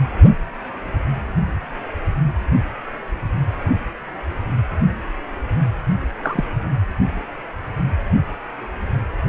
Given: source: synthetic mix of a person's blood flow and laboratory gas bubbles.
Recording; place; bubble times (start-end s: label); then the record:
Doppler ultrasound of blood flow; precordium
6.23-6.44 s: bubbles
From the record:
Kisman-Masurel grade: 122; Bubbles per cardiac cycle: 1 to 2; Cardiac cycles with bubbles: 10 to 50%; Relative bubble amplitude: moderate (0.250 to 0.450); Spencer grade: 2 (many but less than half of the cardiac periods contain bubble signals, singularly or in groups); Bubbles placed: anywhere in the cardiac cycle